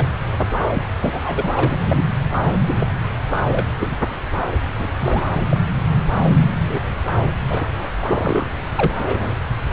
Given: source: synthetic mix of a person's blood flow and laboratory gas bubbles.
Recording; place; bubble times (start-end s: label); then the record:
Doppler ultrasound of blood flow; subclavian vein
0.00-0.07 s: bubbles
0.37-0.45 s: bubbles
0.74-0.83 s: bubbles
1.01-1.22 s: bubbles
1.24-1.51 s: bubbles
1.55-1.80 s: bubbles
1.84-2.05 s: bubbles
2.67-2.74 s: bubbles
2.78-2.86 s: bubbles
3.47-3.65 s: bubbles
3.79-3.96 s: bubbles
4.78-4.90 s: bubbles
4.95-5.24 s: bubbles
5.33-5.46 s: bubbles
5.51-5.60 s: bubbles
6.24-6.31 s: bubbles
6.68-6.81 s: bubbles
7.48-7.89 s: bubbles
8.01-8.50 s: bubbles
8.75-9.38 s: bubbles
From the record:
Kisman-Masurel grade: 242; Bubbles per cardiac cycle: several, 3 to 8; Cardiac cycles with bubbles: 100%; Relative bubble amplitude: moderate (0.250 to 0.450); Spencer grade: 3 (all of the cardiac periods contain showers or single bubble signals, but not dominating or overriding the cardiac motion signals); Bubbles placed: anywhere in the cardiac cycle